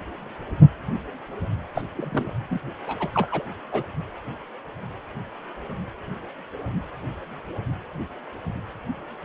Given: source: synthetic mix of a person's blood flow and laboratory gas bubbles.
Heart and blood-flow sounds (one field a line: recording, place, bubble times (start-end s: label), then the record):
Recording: Doppler ultrasound of blood flow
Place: precordium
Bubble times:
1.75-1.82 s: bubbles
1.95-2.33 s: bubbles
2.50-2.59 s: bubbles
2.87-2.97 s: bubbles
3.00-3.09 s: bubbles
3.14-3.43 s: bubbles
3.72-3.87 s: bubbles
From the record:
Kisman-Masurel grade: 221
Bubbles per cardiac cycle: several, 3 to 8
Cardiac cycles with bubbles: 10 to 50%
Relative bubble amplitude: barely perceptible (0.100 to 0.250)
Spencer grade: 2 (many but less than half of the cardiac periods contain bubble signals, singularly or in groups)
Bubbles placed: anywhere in the cardiac cycle